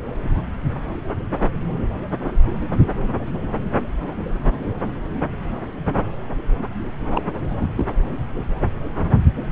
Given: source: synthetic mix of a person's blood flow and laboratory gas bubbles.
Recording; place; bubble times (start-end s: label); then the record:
Doppler ultrasound of blood flow; subclavian vein
7.10-7.21 s: bubbles
7.50-7.86 s: bubbles
From the record:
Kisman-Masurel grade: 222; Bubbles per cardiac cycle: several, 3 to 8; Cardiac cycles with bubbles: 10 to 50%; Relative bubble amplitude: moderate (0.250 to 0.450); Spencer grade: 2 (many but less than half of the cardiac periods contain bubble signals, singularly or in groups); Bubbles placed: anywhere in the cardiac cycle